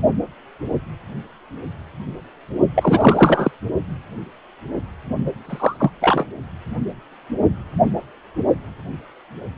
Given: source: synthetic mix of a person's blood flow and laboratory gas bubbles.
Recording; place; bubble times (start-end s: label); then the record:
Doppler ultrasound of blood flow; precordium
2.75-3.51 s: bubbles
5.45-5.91 s: bubbles
6.01-6.25 s: bubbles
From the record:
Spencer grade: 2 (many but less than half of the cardiac periods contain bubble signals, singularly or in groups); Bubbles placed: only in the low amplitude regions of the cardiac cycle